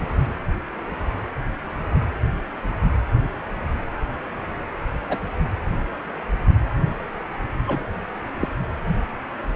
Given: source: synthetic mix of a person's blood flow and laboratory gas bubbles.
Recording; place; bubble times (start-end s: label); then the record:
Doppler ultrasound of blood flow; precordium
5.09-5.18 s: bubbles
7.67-7.83 s: bubbles
8.39-8.48 s: bubbles
From the record:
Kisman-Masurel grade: 122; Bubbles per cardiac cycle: 1 to 2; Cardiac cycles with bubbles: 10 to 50%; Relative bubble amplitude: moderate (0.250 to 0.450); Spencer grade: 2 (many but less than half of the cardiac periods contain bubble signals, singularly or in groups); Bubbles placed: anywhere in the cardiac cycle